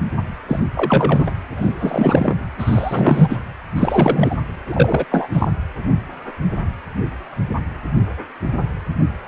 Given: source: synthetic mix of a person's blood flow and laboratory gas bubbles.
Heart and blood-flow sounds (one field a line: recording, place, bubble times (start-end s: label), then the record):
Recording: Doppler ultrasound of blood flow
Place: precordium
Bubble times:
0.48-0.59 s: bubbles
0.75-1.32 s: bubbles
1.56-2.34 s: bubbles
2.58-3.37 s: bubbles
3.75-4.37 s: bubbles
4.68-5.05 s: bubbles
5.11-5.28 s: bubbles
5.33-5.48 s: bubbles
From the record:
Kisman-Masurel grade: 223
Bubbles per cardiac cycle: several, 3 to 8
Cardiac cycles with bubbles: 10 to 50%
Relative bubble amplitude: loud (0.450 to 0.775)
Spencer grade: 2 (many but less than half of the cardiac periods contain bubble signals, singularly or in groups)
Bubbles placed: anywhere in the cardiac cycle